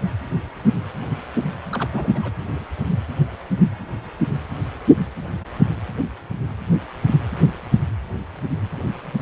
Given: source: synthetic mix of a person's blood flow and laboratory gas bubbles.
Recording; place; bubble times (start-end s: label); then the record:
Doppler ultrasound of blood flow; precordium
1.71-1.87 s: bubbles
1.90-2.31 s: bubbles
From the record:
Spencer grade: 1 (occasional bubble signal discernible with the cardiac motion signal, with majority of cardiac periods free of bubbles); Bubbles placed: anywhere in the cardiac cycle